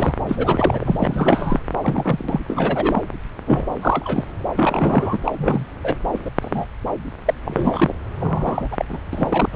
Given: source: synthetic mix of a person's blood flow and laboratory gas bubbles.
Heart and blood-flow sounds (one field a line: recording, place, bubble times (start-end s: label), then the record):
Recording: Doppler ultrasound of blood flow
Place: subclavian vein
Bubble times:
0.00-0.14 s: bubbles
0.29-1.60 s: bubbles
1.81-2.40 s: bubbles
2.48-3.09 s: bubbles
3.46-3.74 s: bubbles
3.82-4.24 s: bubbles
4.58-5.18 s: bubbles
5.24-5.65 s: bubbles
5.84-5.96 s: bubbles
6.13-6.30 s: bubbles
6.42-6.65 s: bubbles
7.25-7.34 s: bubbles
7.45-7.95 s: bubbles
8.20-8.68 s: bubbles
8.71-8.85 s: bubbles
8.89-8.99 s: bubbles
9.13-9.49 s: bubbles
9.53-9.56 s: bubbles
From the record:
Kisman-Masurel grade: 242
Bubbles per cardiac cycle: several, 3 to 8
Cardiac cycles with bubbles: 100%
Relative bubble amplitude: moderate (0.250 to 0.450)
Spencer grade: 3 (all of the cardiac periods contain showers or single bubble signals, but not dominating or overriding the cardiac motion signals)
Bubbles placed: anywhere in the cardiac cycle